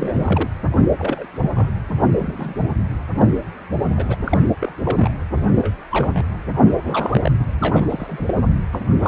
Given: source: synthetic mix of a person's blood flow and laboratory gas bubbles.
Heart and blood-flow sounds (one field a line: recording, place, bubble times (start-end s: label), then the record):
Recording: Doppler ultrasound of blood flow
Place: precordium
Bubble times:
0.00-0.49 s: bubbles
0.76-0.89 s: bubbles
0.97-1.27 s: bubbles
1.32-1.72 s: bubbles
2.17-2.63 s: bubbles
3.15-3.34 s: bubbles
3.96-4.16 s: bubbles
4.25-4.48 s: bubbles
4.59-4.72 s: bubbles
4.83-5.11 s: bubbles
5.36-5.41 s: bubbles
5.48-5.74 s: bubbles
5.91-6.25 s: bubbles
6.54-7.31 s: bubbles
7.39-7.46 s: bubbles
7.60-7.85 s: bubbles
7.89-8.34 s: bubbles
8.73-8.86 s: bubbles
8.99-9.08 s: bubbles
From the record:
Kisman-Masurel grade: 242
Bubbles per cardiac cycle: several, 3 to 8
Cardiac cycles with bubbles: 100%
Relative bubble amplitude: moderate (0.250 to 0.450)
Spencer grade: 3 (all of the cardiac periods contain showers or single bubble signals, but not dominating or overriding the cardiac motion signals)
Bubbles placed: anywhere in the cardiac cycle